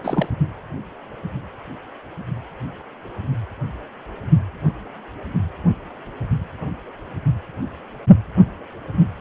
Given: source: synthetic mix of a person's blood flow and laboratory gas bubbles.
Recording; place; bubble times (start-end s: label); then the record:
Doppler ultrasound of blood flow; precordium
0.01-0.28 s: bubbles
From the record:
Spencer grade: 2 (many but less than half of the cardiac periods contain bubble signals, singularly or in groups); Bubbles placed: only in the low amplitude regions of the cardiac cycle